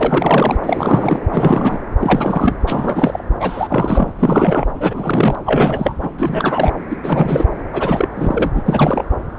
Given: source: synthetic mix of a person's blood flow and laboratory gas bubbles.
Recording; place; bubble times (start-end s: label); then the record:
Doppler ultrasound of blood flow; subclavian vein
0.00-0.56 s: bubbles
0.62-1.20 s: bubbles
1.30-1.81 s: bubbles
2.00-2.54 s: bubbles
2.67-3.22 s: bubbles
3.40-4.13 s: bubbles
4.18-4.66 s: bubbles
4.80-5.35 s: bubbles
5.45-5.95 s: bubbles
6.02-6.11 s: bubbles
6.18-6.72 s: bubbles
6.90-6.97 s: bubbles
7.03-7.46 s: bubbles
7.72-8.08 s: bubbles
8.16-8.62 s: bubbles
8.66-9.04 s: bubbles
From the record:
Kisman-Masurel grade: 343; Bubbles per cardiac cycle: rolling drumbeat, 9 or more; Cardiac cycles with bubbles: 100%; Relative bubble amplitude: loud (0.450 to 0.775); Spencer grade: 3 (all of the cardiac periods contain showers or single bubble signals, but not dominating or overriding the cardiac motion signals); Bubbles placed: anywhere in the cardiac cycle